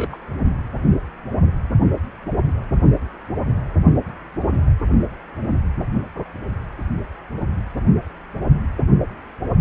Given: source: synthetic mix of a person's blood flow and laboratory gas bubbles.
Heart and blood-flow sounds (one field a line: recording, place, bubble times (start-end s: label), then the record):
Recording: Doppler ultrasound of blood flow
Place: precordium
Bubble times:
0.00-0.17 s: bubbles
From the record:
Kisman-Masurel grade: 111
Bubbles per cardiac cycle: 1 to 2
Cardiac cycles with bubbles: 1 to 10%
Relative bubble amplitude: barely perceptible (0.100 to 0.250)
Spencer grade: 1 (occasional bubble signal discernible with the cardiac motion signal, with majority of cardiac periods free of bubbles)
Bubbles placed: anywhere in the cardiac cycle